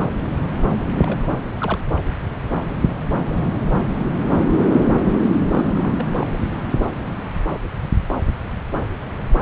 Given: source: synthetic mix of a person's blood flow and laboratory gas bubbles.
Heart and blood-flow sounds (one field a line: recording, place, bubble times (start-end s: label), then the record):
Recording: Doppler ultrasound of blood flow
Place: subclavian vein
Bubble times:
0.96-1.19 s: bubbles
1.61-1.80 s: bubbles
5.52-6.05 s: bubbles
6.18-6.38 s: bubbles
From the record:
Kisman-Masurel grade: 221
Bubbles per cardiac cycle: several, 3 to 8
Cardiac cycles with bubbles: 10 to 50%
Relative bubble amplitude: barely perceptible (0.100 to 0.250)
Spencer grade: 2 (many but less than half of the cardiac periods contain bubble signals, singularly or in groups)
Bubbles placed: anywhere in the cardiac cycle